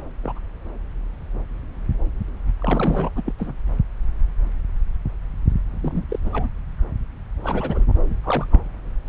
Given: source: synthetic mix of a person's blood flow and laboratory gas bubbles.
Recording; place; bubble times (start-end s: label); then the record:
Doppler ultrasound of blood flow; subclavian vein
0.00-0.03 s: bubbles
0.23-0.39 s: bubbles
2.59-3.09 s: bubbles
3.16-3.22 s: bubbles
3.25-3.33 s: bubbles
3.38-3.56 s: bubbles
5.82-6.06 s: bubbles
6.08-6.19 s: bubbles
6.21-6.29 s: bubbles
6.33-6.48 s: bubbles
7.44-7.85 s: bubbles
8.09-8.15 s: bubbles
8.23-8.47 s: bubbles
8.50-8.64 s: bubbles
From the record:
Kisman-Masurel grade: 221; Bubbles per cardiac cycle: several, 3 to 8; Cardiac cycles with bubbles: 10 to 50%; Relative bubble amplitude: barely perceptible (0.100 to 0.250); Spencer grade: 2 (many but less than half of the cardiac periods contain bubble signals, singularly or in groups); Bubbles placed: anywhere in the cardiac cycle